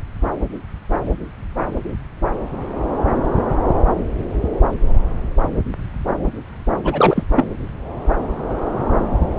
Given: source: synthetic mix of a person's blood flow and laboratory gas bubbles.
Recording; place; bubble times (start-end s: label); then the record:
Doppler ultrasound of blood flow; subclavian vein
6.84-7.26 s: bubbles
7.36-7.45 s: bubbles
From the record:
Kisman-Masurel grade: 223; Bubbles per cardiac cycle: several, 3 to 8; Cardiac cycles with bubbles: 10 to 50%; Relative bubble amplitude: loud (0.450 to 0.775); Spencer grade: 2 (many but less than half of the cardiac periods contain bubble signals, singularly or in groups); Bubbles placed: anywhere in the cardiac cycle